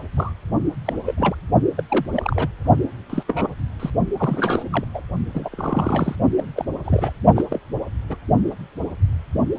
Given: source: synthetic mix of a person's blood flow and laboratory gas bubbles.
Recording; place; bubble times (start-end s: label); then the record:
Doppler ultrasound of blood flow; precordium
0.16-0.33 s: bubbles
0.85-0.93 s: bubbles
1.05-1.15 s: bubbles
1.18-1.35 s: bubbles
1.77-1.83 s: bubbles
1.89-2.06 s: bubbles
2.12-2.48 s: bubbles
3.10-3.23 s: bubbles
3.28-3.48 s: bubbles
3.80-3.90 s: bubbles
4.17-4.63 s: bubbles
4.71-4.84 s: bubbles
4.94-5.02 s: bubbles
5.34-5.49 s: bubbles
5.52-6.16 s: bubbles
6.37-6.46 s: bubbles
6.56-6.65 s: bubbles
6.84-7.12 s: bubbles
7.36-7.45 s: bubbles
7.50-7.60 s: bubbles
8.09-8.16 s: bubbles
From the record:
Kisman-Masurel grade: 232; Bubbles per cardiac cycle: several, 3 to 8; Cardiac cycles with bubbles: 50 to 99%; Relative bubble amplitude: moderate (0.250 to 0.450); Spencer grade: 3 (all of the cardiac periods contain showers or single bubble signals, but not dominating or overriding the cardiac motion signals); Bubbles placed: only in the low amplitude regions of the cardiac cycle